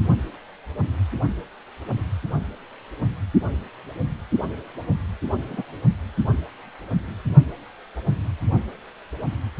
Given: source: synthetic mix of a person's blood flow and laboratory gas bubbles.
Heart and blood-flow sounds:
Doppler ultrasound of blood flow; precordium
5.49-5.62 s: bubbles
From the record:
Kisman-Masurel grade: 112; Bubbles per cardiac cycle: 1 to 2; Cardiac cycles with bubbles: 1 to 10%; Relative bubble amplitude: moderate (0.250 to 0.450); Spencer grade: 1 (occasional bubble signal discernible with the cardiac motion signal, with majority of cardiac periods free of bubbles); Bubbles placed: only in the low amplitude regions of the cardiac cycle

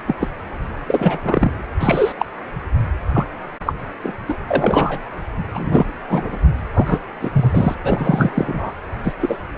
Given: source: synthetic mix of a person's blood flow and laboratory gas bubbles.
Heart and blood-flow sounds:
Doppler ultrasound of blood flow; precordium
0.07-0.16 s: bubbles
0.20-0.29 s: bubbles
0.86-1.21 s: bubbles
1.24-1.51 s: bubbles
1.79-2.13 s: bubbles
2.18-2.26 s: bubbles
3.14-3.26 s: bubbles
3.66-3.75 s: bubbles
4.03-4.14 s: bubbles
4.28-4.35 s: bubbles
4.48-5.00 s: bubbles
5.53-5.86 s: bubbles
6.09-6.38 s: bubbles
6.74-6.99 s: bubbles
7.21-7.29 s: bubbles
7.33-7.75 s: bubbles
7.83-8.72 s: bubbles
9.04-9.13 s: bubbles
9.21-9.37 s: bubbles
From the record:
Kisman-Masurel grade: 233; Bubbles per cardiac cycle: several, 3 to 8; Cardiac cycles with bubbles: 50 to 99%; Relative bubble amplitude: loud (0.450 to 0.775); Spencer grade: 3 (all of the cardiac periods contain showers or single bubble signals, but not dominating or overriding the cardiac motion signals); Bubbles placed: anywhere in the cardiac cycle

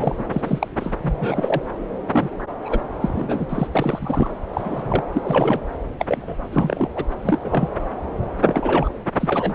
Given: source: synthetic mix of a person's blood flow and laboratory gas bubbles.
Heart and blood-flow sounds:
Doppler ultrasound of blood flow; subclavian vein
0.00-0.15 s: bubbles
0.18-0.24 s: bubbles
0.32-0.68 s: bubbles
0.77-0.93 s: bubbles
1.02-1.62 s: bubbles
2.11-2.30 s: bubbles
2.63-2.81 s: bubbles
3.00-3.67 s: bubbles
3.72-4.37 s: bubbles
4.53-5.04 s: bubbles
5.12-5.61 s: bubbles
5.99-6.36 s: bubbles
6.52-6.90 s: bubbles
6.96-7.04 s: bubbles
7.23-7.38 s: bubbles
7.44-7.69 s: bubbles
8.44-8.95 s: bubbles
9.20-9.55 s: bubbles
From the record:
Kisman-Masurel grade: 242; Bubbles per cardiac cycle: several, 3 to 8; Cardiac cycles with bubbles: 100%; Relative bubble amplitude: moderate (0.250 to 0.450); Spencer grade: 3 (all of the cardiac periods contain showers or single bubble signals, but not dominating or overriding the cardiac motion signals); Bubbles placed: anywhere in the cardiac cycle

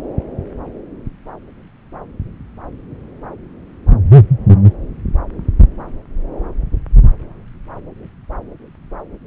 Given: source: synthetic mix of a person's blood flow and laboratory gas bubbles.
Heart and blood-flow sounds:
Doppler ultrasound of blood flow; subclavian vein
no bubbles
From the record:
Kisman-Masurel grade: 000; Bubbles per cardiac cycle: 0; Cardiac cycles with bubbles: 0%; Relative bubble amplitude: no bubbles discernible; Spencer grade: 0 (complete lack of bubble signals)

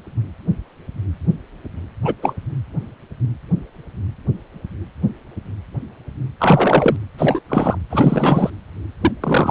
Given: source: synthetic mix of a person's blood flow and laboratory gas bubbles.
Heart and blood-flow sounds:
Doppler ultrasound of blood flow; precordium
2.04-2.14 s: bubbles
2.22-2.34 s: bubbles
6.40-6.96 s: bubbles
7.17-7.40 s: bubbles
7.49-7.77 s: bubbles
7.90-8.50 s: bubbles
9.00-9.11 s: bubbles
9.21-9.51 s: bubbles
From the record:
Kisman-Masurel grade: 223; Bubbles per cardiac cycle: several, 3 to 8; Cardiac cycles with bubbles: 10 to 50%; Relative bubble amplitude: loud (0.450 to 0.775); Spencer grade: 2 (many but less than half of the cardiac periods contain bubble signals, singularly or in groups); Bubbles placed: anywhere in the cardiac cycle

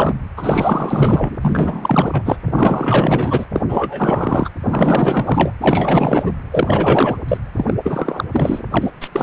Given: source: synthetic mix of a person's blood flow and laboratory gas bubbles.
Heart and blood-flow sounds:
Doppler ultrasound of blood flow; precordium
0.00-0.14 s: bubbles
0.37-1.36 s: bubbles
1.41-2.22 s: bubbles
2.24-2.37 s: bubbles
2.46-3.46 s: bubbles
3.53-3.63 s: bubbles
3.68-4.49 s: bubbles
4.62-5.51 s: bubbles
5.60-6.31 s: bubbles
6.51-7.17 s: bubbles
7.28-7.38 s: bubbles
7.57-7.74 s: bubbles
7.84-8.24 s: bubbles
8.31-8.63 s: bubbles
8.71-8.90 s: bubbles
9.00-9.08 s: bubbles
9.12-9.23 s: bubbles
From the record:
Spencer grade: 4 (maximum detectable bubble signal sounding continuously throughout systole and diastole of every cardiac period, and overriding the amplitude of the normal cardiac signals); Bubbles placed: anywhere in the cardiac cycle

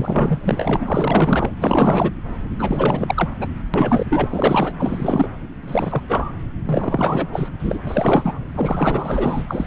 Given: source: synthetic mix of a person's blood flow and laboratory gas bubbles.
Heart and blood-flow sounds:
Doppler ultrasound of blood flow; subclavian vein
0.00-0.40 s: bubbles
0.44-0.77 s: bubbles
0.79-1.53 s: bubbles
1.58-2.11 s: bubbles
2.58-3.29 s: bubbles
3.40-3.47 s: bubbles
3.73-4.06 s: bubbles
4.09-4.72 s: bubbles
4.79-5.29 s: bubbles
5.62-6.02 s: bubbles
6.08-6.31 s: bubbles
6.66-7.49 s: bubbles
7.59-7.79 s: bubbles
7.87-8.38 s: bubbles
8.54-9.67 s: bubbles
From the record:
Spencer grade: 4 (maximum detectable bubble signal sounding continuously throughout systole and diastole of every cardiac period, and overriding the amplitude of the normal cardiac signals); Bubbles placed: anywhere in the cardiac cycle

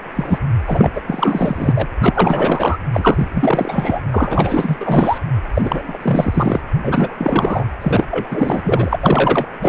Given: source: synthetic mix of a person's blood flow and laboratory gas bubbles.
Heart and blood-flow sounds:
Doppler ultrasound of blood flow; precordium
0.15-0.39 s: bubbles
0.66-1.01 s: bubbles
1.07-1.89 s: bubbles
1.98-2.77 s: bubbles
2.92-3.27 s: bubbles
3.33-4.01 s: bubbles
4.11-4.76 s: bubbles
4.80-5.18 s: bubbles
5.54-6.60 s: bubbles
6.82-7.64 s: bubbles
7.81-8.05 s: bubbles
8.11-8.97 s: bubbles
9.01-9.46 s: bubbles
9.61-9.69 s: bubbles
From the record:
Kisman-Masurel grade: 444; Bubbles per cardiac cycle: continuous sound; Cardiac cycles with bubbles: 100%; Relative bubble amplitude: maximal (0.775 to 0.999); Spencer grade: 4 (maximum detectable bubble signal sounding continuously throughout systole and diastole of every cardiac period, and overriding the amplitude of the normal cardiac signals); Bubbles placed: anywhere in the cardiac cycle

